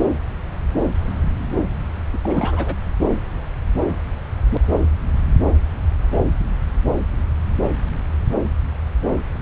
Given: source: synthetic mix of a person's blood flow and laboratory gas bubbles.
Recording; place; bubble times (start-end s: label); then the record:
Doppler ultrasound of blood flow; subclavian vein
2.13-2.18 s: bubbles
2.23-2.75 s: bubbles
From the record:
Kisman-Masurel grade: 212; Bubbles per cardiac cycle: several, 3 to 8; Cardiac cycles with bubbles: 1 to 10%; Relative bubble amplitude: moderate (0.250 to 0.450); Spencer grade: 1 (occasional bubble signal discernible with the cardiac motion signal, with majority of cardiac periods free of bubbles); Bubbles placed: anywhere in the cardiac cycle